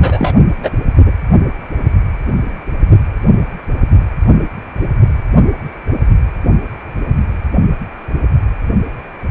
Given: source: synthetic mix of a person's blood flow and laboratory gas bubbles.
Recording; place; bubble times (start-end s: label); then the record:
Doppler ultrasound of blood flow; precordium
0.00-0.35 s: bubbles
0.62-0.70 s: bubbles
1.05-1.12 s: bubbles
From the record:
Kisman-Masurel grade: 213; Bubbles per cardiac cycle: several, 3 to 8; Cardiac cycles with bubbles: 1 to 10%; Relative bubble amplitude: loud (0.450 to 0.775); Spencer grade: 1 (occasional bubble signal discernible with the cardiac motion signal, with majority of cardiac periods free of bubbles); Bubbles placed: only in the low amplitude regions of the cardiac cycle